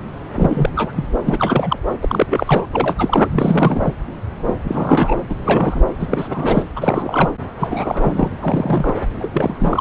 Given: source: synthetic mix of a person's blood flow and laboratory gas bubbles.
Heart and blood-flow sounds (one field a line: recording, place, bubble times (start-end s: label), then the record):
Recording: Doppler ultrasound of blood flow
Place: subclavian vein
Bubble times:
0.35-0.69 s: bubbles
0.76-0.93 s: bubbles
0.96-1.05 s: bubbles
1.25-1.77 s: bubbles
2.01-2.65 s: bubbles
2.73-2.95 s: bubbles
2.98-3.28 s: bubbles
3.31-3.93 s: bubbles
4.46-4.54 s: bubbles
4.64-5.16 s: bubbles
5.29-5.35 s: bubbles
5.45-5.81 s: bubbles
6.00-6.63 s: bubbles
6.75-7.33 s: bubbles
7.57-8.29 s: bubbles
8.41-9.01 s: bubbles
9.19-9.29 s: bubbles
9.33-9.54 s: bubbles
9.60-9.81 s: bubbles
From the record:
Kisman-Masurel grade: 332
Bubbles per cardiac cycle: rolling drumbeat, 9 or more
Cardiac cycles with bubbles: 50 to 99%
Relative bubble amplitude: moderate (0.250 to 0.450)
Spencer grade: 3 (all of the cardiac periods contain showers or single bubble signals, but not dominating or overriding the cardiac motion signals)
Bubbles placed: anywhere in the cardiac cycle